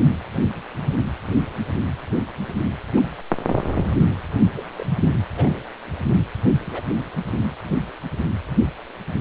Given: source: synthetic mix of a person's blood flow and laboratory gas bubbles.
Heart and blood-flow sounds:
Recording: Doppler ultrasound of blood flow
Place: precordium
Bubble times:
2.96-3.00 s: bubbles
4.57-4.70 s: bubbles
4.78-4.87 s: bubbles
5.36-5.60 s: bubbles
6.71-6.83 s: bubbles
From the record:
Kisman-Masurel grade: 121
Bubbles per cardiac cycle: 1 to 2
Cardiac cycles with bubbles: 10 to 50%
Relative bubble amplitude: barely perceptible (0.100 to 0.250)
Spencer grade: 2 (many but less than half of the cardiac periods contain bubble signals, singularly or in groups)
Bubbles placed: anywhere in the cardiac cycle

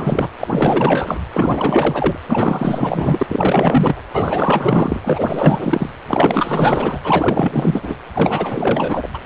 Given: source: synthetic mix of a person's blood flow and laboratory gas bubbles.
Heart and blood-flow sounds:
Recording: Doppler ultrasound of blood flow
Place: precordium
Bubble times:
0.00-0.30 s: bubbles
0.40-1.19 s: bubbles
1.33-2.18 s: bubbles
2.29-4.01 s: bubbles
4.13-5.00 s: bubbles
5.04-5.90 s: bubbles
6.07-7.00 s: bubbles
7.04-7.95 s: bubbles
8.13-9.08 s: bubbles
9.13-9.19 s: bubbles
From the record:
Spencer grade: 4 (maximum detectable bubble signal sounding continuously throughout systole and diastole of every cardiac period, and overriding the amplitude of the normal cardiac signals)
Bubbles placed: anywhere in the cardiac cycle

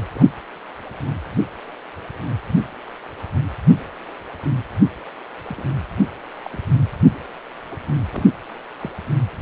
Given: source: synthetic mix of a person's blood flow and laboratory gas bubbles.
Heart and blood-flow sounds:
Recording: Doppler ultrasound of blood flow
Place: precordium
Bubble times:
0.15-0.25 s: bubbles
5.48-5.65 s: bubbles
6.45-6.50 s: bubbles
6.52-6.57 s: bubbles
7.71-7.76 s: bubbles
8.12-8.25 s: bubbles
8.79-8.91 s: bubbles
From the record:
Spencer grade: 2 (many but less than half of the cardiac periods contain bubble signals, singularly or in groups)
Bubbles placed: anywhere in the cardiac cycle

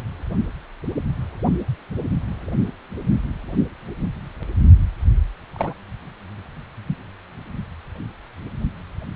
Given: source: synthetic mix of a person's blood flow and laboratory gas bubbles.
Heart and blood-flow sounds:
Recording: Doppler ultrasound of blood flow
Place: precordium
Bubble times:
5.53-5.74 s: bubbles
6.88-6.97 s: bubbles
From the record:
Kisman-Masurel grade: 121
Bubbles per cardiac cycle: 1 to 2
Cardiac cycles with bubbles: 10 to 50%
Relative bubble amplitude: barely perceptible (0.100 to 0.250)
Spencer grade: 2 (many but less than half of the cardiac periods contain bubble signals, singularly or in groups)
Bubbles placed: only in the low amplitude regions of the cardiac cycle

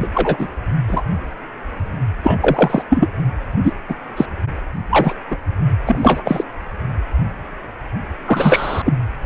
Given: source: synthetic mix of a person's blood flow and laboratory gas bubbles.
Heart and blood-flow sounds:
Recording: Doppler ultrasound of blood flow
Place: precordium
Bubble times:
0.00-0.08 s: bubbles
0.14-0.47 s: bubbles
0.88-1.03 s: bubbles
2.23-2.83 s: bubbles
2.90-3.07 s: bubbles
3.63-3.73 s: bubbles
3.89-3.95 s: bubbles
4.16-4.26 s: bubbles
4.90-5.15 s: bubbles
5.29-5.37 s: bubbles
5.86-6.21 s: bubbles
6.24-6.45 s: bubbles
8.26-8.82 s: bubbles
8.85-8.93 s: bubbles
From the record:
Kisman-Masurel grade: 233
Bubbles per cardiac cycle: several, 3 to 8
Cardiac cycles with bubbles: 50 to 99%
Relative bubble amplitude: loud (0.450 to 0.775)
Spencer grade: 3 (all of the cardiac periods contain showers or single bubble signals, but not dominating or overriding the cardiac motion signals)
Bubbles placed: anywhere in the cardiac cycle

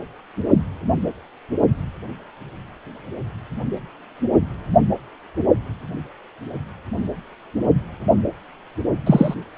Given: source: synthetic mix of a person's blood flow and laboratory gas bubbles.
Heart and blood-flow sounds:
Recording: Doppler ultrasound of blood flow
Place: precordium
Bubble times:
9.06-9.34 s: bubbles
From the record:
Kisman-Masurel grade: 113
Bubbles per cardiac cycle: 1 to 2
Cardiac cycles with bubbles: 1 to 10%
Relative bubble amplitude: loud (0.450 to 0.775)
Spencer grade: 1 (occasional bubble signal discernible with the cardiac motion signal, with majority of cardiac periods free of bubbles)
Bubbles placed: only in the low amplitude regions of the cardiac cycle

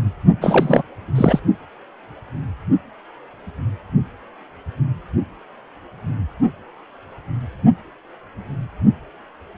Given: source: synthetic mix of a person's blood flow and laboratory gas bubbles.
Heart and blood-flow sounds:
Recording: Doppler ultrasound of blood flow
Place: precordium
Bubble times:
0.41-0.83 s: bubbles
1.15-1.40 s: bubbles
From the record:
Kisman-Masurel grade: 213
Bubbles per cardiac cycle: several, 3 to 8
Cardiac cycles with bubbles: 1 to 10%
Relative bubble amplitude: loud (0.450 to 0.775)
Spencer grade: 1 (occasional bubble signal discernible with the cardiac motion signal, with majority of cardiac periods free of bubbles)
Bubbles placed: only in the low amplitude regions of the cardiac cycle

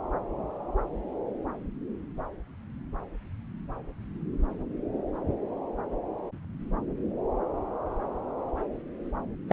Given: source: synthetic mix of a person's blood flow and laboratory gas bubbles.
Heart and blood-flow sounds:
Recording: Doppler ultrasound of blood flow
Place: subclavian vein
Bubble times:
9.48-9.53 s: bubbles
From the record:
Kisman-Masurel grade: 212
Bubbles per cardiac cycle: several, 3 to 8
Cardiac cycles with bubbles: 1 to 10%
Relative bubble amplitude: moderate (0.250 to 0.450)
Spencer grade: 1 (occasional bubble signal discernible with the cardiac motion signal, with majority of cardiac periods free of bubbles)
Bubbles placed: anywhere in the cardiac cycle

